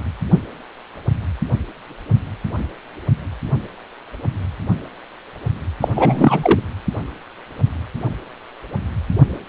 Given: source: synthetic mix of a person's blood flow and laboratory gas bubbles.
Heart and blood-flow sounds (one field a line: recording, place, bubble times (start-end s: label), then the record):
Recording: Doppler ultrasound of blood flow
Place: precordium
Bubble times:
5.81-5.88 s: bubbles
5.96-6.60 s: bubbles
From the record:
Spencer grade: 1 (occasional bubble signal discernible with the cardiac motion signal, with majority of cardiac periods free of bubbles)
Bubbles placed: anywhere in the cardiac cycle